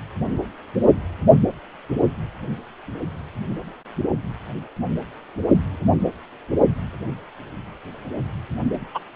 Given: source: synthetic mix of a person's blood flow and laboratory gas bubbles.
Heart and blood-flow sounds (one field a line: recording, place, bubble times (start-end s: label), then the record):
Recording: Doppler ultrasound of blood flow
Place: precordium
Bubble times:
8.95-8.99 s: bubbles
From the record:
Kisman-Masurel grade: 123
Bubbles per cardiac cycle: 1 to 2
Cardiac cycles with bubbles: 10 to 50%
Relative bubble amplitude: loud (0.450 to 0.775)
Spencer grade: 2 (many but less than half of the cardiac periods contain bubble signals, singularly or in groups)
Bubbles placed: only in the low amplitude regions of the cardiac cycle